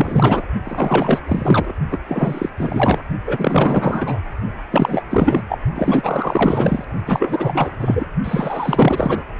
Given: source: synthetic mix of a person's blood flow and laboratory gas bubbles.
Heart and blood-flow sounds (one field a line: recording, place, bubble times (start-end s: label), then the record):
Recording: Doppler ultrasound of blood flow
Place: precordium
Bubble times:
0.00-0.45 s: bubbles
0.64-1.19 s: bubbles
1.26-1.72 s: bubbles
1.91-1.99 s: bubbles
2.07-2.50 s: bubbles
2.57-3.02 s: bubbles
3.26-4.19 s: bubbles
4.71-5.02 s: bubbles
5.10-5.43 s: bubbles
5.48-5.58 s: bubbles
5.75-6.84 s: bubbles
7.07-8.06 s: bubbles
8.24-9.25 s: bubbles
From the record:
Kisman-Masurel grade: 444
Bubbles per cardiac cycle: continuous sound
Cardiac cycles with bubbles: 100%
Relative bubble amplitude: maximal (0.775 to 0.999)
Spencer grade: 4 (maximum detectable bubble signal sounding continuously throughout systole and diastole of every cardiac period, and overriding the amplitude of the normal cardiac signals)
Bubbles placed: only in the low amplitude regions of the cardiac cycle